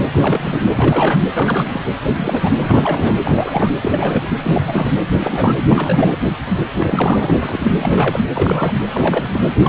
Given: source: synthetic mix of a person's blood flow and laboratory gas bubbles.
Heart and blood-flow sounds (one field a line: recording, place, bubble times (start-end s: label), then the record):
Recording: Doppler ultrasound of blood flow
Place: precordium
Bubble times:
0.00-0.07 s: bubbles
0.11-0.70 s: bubbles
0.75-1.20 s: bubbles
1.34-1.81 s: bubbles
2.08-2.53 s: bubbles
2.64-3.16 s: bubbles
3.24-3.70 s: bubbles
3.81-4.33 s: bubbles
4.39-4.97 s: bubbles
5.20-5.55 s: bubbles
5.69-6.19 s: bubbles
6.50-6.62 s: bubbles
6.76-7.38 s: bubbles
7.42-7.71 s: bubbles
7.79-8.20 s: bubbles
8.35-8.79 s: bubbles
8.93-9.44 s: bubbles
9.62-9.69 s: bubbles
From the record:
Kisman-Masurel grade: 342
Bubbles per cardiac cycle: rolling drumbeat, 9 or more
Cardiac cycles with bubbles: 100%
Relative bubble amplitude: moderate (0.250 to 0.450)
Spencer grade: 3 (all of the cardiac periods contain showers or single bubble signals, but not dominating or overriding the cardiac motion signals)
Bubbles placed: anywhere in the cardiac cycle